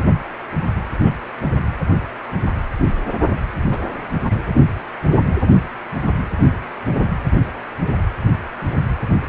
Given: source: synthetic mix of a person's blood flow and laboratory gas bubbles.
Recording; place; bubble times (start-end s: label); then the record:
Doppler ultrasound of blood flow; precordium
1.00-1.11 s: bubbles
3.71-3.81 s: bubbles
4.24-4.44 s: bubbles
From the record:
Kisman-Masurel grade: 121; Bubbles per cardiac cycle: 1 to 2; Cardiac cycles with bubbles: 10 to 50%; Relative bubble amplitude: barely perceptible (0.100 to 0.250); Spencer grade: 2 (many but less than half of the cardiac periods contain bubble signals, singularly or in groups); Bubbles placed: anywhere in the cardiac cycle